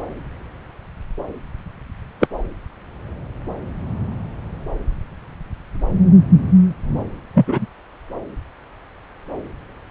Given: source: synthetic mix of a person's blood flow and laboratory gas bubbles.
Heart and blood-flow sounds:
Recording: Doppler ultrasound of blood flow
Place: subclavian vein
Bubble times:
2.19-2.27 s: bubbles
7.34-7.66 s: bubbles
From the record:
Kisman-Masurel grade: 123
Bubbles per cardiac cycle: 1 to 2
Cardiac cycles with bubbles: 10 to 50%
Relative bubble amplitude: loud (0.450 to 0.775)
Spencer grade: 2 (many but less than half of the cardiac periods contain bubble signals, singularly or in groups)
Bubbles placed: anywhere in the cardiac cycle

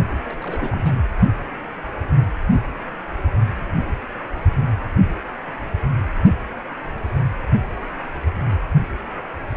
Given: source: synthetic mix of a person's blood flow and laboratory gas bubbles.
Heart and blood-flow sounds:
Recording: Doppler ultrasound of blood flow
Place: precordium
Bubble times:
0.11-0.14 s: bubbles
0.24-1.03 s: bubbles
From the record:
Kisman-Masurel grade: 211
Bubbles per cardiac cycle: several, 3 to 8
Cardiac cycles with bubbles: 1 to 10%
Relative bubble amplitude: barely perceptible (0.100 to 0.250)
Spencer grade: 1 (occasional bubble signal discernible with the cardiac motion signal, with majority of cardiac periods free of bubbles)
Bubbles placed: anywhere in the cardiac cycle

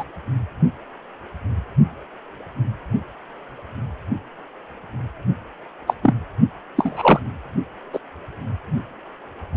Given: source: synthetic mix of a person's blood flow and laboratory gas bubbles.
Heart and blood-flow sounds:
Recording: Doppler ultrasound of blood flow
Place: precordium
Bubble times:
0.00-0.04 s: bubbles
5.87-5.94 s: bubbles
6.02-6.14 s: bubbles
6.77-7.20 s: bubbles
7.92-7.99 s: bubbles
From the record:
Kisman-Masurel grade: 123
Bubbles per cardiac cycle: 1 to 2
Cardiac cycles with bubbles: 10 to 50%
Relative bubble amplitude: loud (0.450 to 0.775)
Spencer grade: 2 (many but less than half of the cardiac periods contain bubble signals, singularly or in groups)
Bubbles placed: anywhere in the cardiac cycle

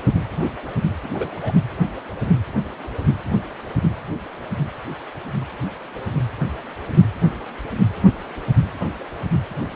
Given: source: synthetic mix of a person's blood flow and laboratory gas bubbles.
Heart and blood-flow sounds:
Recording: Doppler ultrasound of blood flow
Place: precordium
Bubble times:
1.03-1.08 s: bubbles
1.14-1.36 s: bubbles
1.42-1.54 s: bubbles
From the record:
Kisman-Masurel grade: 211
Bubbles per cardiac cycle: several, 3 to 8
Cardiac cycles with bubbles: 1 to 10%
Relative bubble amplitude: barely perceptible (0.100 to 0.250)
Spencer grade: 1 (occasional bubble signal discernible with the cardiac motion signal, with majority of cardiac periods free of bubbles)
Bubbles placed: anywhere in the cardiac cycle

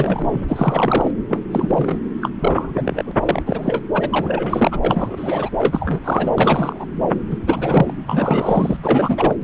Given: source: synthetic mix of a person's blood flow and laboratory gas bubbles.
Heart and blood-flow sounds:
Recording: Doppler ultrasound of blood flow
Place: subclavian vein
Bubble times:
0.00-0.45 s: bubbles
0.48-1.10 s: bubbles
1.28-1.42 s: bubbles
1.51-1.97 s: bubbles
2.21-2.29 s: bubbles
2.39-3.12 s: bubbles
3.21-3.42 s: bubbles
3.46-3.83 s: bubbles
3.94-4.79 s: bubbles
4.83-5.50 s: bubbles
5.58-6.01 s: bubbles
6.04-6.32 s: bubbles
6.38-6.85 s: bubbles
7.30-7.38 s: bubbles
7.47-7.95 s: bubbles
8.07-8.77 s: bubbles
8.83-9.36 s: bubbles
From the record:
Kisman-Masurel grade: 342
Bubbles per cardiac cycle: rolling drumbeat, 9 or more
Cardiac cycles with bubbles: 100%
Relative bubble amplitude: moderate (0.250 to 0.450)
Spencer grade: 3 (all of the cardiac periods contain showers or single bubble signals, but not dominating or overriding the cardiac motion signals)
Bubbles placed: anywhere in the cardiac cycle

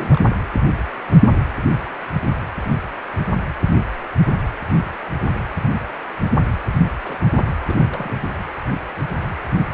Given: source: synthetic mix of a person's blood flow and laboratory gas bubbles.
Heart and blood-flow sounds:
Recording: Doppler ultrasound of blood flow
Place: precordium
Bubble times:
0.00-0.20 s: bubbles
0.26-0.40 s: bubbles
6.73-6.79 s: bubbles
7.03-7.16 s: bubbles
7.32-7.43 s: bubbles
7.66-8.24 s: bubbles
From the record:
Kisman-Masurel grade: 221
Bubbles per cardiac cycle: several, 3 to 8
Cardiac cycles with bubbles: 10 to 50%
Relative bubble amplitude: barely perceptible (0.100 to 0.250)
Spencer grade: 2 (many but less than half of the cardiac periods contain bubble signals, singularly or in groups)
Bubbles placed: anywhere in the cardiac cycle

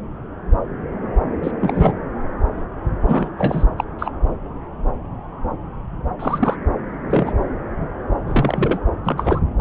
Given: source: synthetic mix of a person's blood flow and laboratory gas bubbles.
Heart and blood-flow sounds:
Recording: Doppler ultrasound of blood flow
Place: subclavian vein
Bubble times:
1.43-1.52 s: bubbles
1.61-1.93 s: bubbles
3.08-3.29 s: bubbles
3.39-3.65 s: bubbles
3.78-3.84 s: bubbles
3.98-4.11 s: bubbles
6.19-6.56 s: bubbles
7.10-7.33 s: bubbles
8.28-8.79 s: bubbles
9.04-9.40 s: bubbles
From the record:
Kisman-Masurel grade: 222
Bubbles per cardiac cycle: several, 3 to 8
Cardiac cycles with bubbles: 10 to 50%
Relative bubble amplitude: moderate (0.250 to 0.450)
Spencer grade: 2 (many but less than half of the cardiac periods contain bubble signals, singularly or in groups)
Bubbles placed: anywhere in the cardiac cycle

